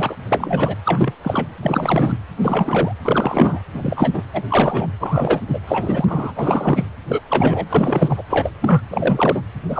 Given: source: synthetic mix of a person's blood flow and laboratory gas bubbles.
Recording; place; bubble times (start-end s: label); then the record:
Doppler ultrasound of blood flow; precordium
0.00-0.15 s: bubbles
0.30-0.76 s: bubbles
0.85-1.13 s: bubbles
1.22-1.47 s: bubbles
1.62-2.18 s: bubbles
2.41-2.95 s: bubbles
3.05-3.60 s: bubbles
3.74-4.09 s: bubbles
4.13-4.22 s: bubbles
4.33-4.42 s: bubbles
4.50-4.87 s: bubbles
5.00-5.41 s: bubbles
5.48-5.59 s: bubbles
5.67-6.33 s: bubbles
6.36-6.86 s: bubbles
7.08-7.21 s: bubbles
7.30-7.67 s: bubbles
7.69-8.22 s: bubbles
8.29-8.53 s: bubbles
8.60-8.82 s: bubbles
8.91-9.42 s: bubbles
9.69-9.80 s: bubbles
From the record:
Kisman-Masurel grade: 342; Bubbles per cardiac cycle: rolling drumbeat, 9 or more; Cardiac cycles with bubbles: 100%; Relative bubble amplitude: moderate (0.250 to 0.450); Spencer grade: 3 (all of the cardiac periods contain showers or single bubble signals, but not dominating or overriding the cardiac motion signals); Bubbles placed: anywhere in the cardiac cycle